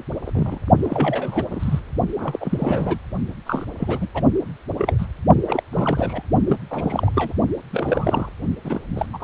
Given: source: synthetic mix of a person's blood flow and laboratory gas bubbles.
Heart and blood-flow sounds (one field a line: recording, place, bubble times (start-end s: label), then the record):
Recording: Doppler ultrasound of blood flow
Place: precordium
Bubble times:
0.26-0.31 s: bubbles
0.34-0.59 s: bubbles
0.82-1.45 s: bubbles
1.51-1.80 s: bubbles
2.18-2.98 s: bubbles
3.46-3.65 s: bubbles
3.77-4.07 s: bubbles
4.15-4.23 s: bubbles
4.78-5.07 s: bubbles
5.47-5.62 s: bubbles
5.73-6.23 s: bubbles
6.48-6.57 s: bubbles
6.70-7.11 s: bubbles
7.14-7.33 s: bubbles
7.71-8.29 s: bubbles
8.64-8.80 s: bubbles
8.96-9.06 s: bubbles
9.13-9.24 s: bubbles
From the record:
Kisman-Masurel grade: 342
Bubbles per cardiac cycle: rolling drumbeat, 9 or more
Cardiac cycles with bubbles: 100%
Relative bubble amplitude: moderate (0.250 to 0.450)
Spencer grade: 3 (all of the cardiac periods contain showers or single bubble signals, but not dominating or overriding the cardiac motion signals)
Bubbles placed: only in the low amplitude regions of the cardiac cycle